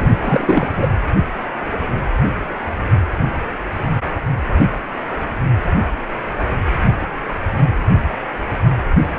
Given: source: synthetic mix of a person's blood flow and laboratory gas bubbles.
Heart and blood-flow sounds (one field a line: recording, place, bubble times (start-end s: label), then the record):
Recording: Doppler ultrasound of blood flow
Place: precordium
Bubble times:
0.00-0.88 s: bubbles
From the record:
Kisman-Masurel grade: 212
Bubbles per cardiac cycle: several, 3 to 8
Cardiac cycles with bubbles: 1 to 10%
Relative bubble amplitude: moderate (0.250 to 0.450)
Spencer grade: 1 (occasional bubble signal discernible with the cardiac motion signal, with majority of cardiac periods free of bubbles)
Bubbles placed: anywhere in the cardiac cycle